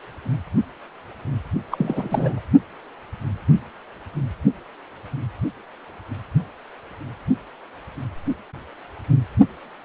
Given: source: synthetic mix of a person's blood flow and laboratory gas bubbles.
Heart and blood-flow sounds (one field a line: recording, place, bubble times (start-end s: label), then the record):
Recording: Doppler ultrasound of blood flow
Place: precordium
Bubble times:
1.71-2.41 s: bubbles
From the record:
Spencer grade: 1 (occasional bubble signal discernible with the cardiac motion signal, with majority of cardiac periods free of bubbles)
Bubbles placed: only in the low amplitude regions of the cardiac cycle